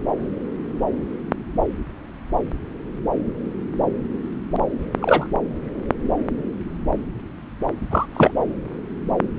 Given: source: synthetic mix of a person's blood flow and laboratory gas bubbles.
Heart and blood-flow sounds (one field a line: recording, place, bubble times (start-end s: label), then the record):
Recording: Doppler ultrasound of blood flow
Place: subclavian vein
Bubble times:
5.01-5.27 s: bubbles
7.90-8.06 s: bubbles
8.14-8.31 s: bubbles
From the record:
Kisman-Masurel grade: 213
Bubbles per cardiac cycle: several, 3 to 8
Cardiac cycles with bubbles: 1 to 10%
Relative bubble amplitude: loud (0.450 to 0.775)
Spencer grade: 1 (occasional bubble signal discernible with the cardiac motion signal, with majority of cardiac periods free of bubbles)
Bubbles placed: anywhere in the cardiac cycle